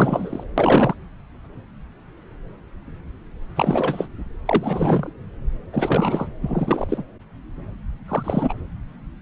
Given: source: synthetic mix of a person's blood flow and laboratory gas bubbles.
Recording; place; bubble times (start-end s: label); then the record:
Doppler ultrasound of blood flow; subclavian vein
0.00-0.44 s: bubbles
0.57-0.95 s: bubbles
3.55-4.08 s: bubbles
4.45-5.13 s: bubbles
5.72-6.29 s: bubbles
6.40-7.04 s: bubbles
8.08-8.54 s: bubbles
From the record:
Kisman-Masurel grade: 333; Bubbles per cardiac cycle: rolling drumbeat, 9 or more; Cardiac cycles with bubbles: 50 to 99%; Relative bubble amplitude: loud (0.450 to 0.775); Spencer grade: 3 (all of the cardiac periods contain showers or single bubble signals, but not dominating or overriding the cardiac motion signals); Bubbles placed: anywhere in the cardiac cycle